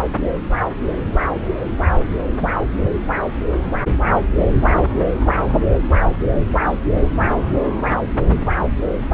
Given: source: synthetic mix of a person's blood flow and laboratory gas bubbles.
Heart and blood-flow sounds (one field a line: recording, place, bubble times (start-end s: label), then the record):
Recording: Doppler ultrasound of blood flow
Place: subclavian vein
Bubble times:
2.31-2.57 s: bubbles
From the record:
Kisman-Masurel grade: 111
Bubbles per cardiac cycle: 1 to 2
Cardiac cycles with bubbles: 1 to 10%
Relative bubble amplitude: barely perceptible (0.100 to 0.250)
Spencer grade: 1 (occasional bubble signal discernible with the cardiac motion signal, with majority of cardiac periods free of bubbles)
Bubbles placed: anywhere in the cardiac cycle